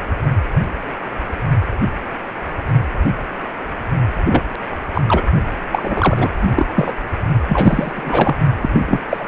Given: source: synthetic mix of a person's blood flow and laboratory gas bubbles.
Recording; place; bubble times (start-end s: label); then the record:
Doppler ultrasound of blood flow; precordium
4.24-4.44 s: bubbles
4.94-5.02 s: bubbles
5.06-5.23 s: bubbles
5.71-6.31 s: bubbles
6.41-6.51 s: bubbles
6.55-6.65 s: bubbles
6.76-6.93 s: bubbles
7.48-8.37 s: bubbles
8.62-8.70 s: bubbles
8.72-8.99 s: bubbles
9.09-9.28 s: bubbles
From the record:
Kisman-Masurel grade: 223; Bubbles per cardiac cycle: several, 3 to 8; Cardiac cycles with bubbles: 10 to 50%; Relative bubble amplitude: loud (0.450 to 0.775); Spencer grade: 2 (many but less than half of the cardiac periods contain bubble signals, singularly or in groups); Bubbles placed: only in the low amplitude regions of the cardiac cycle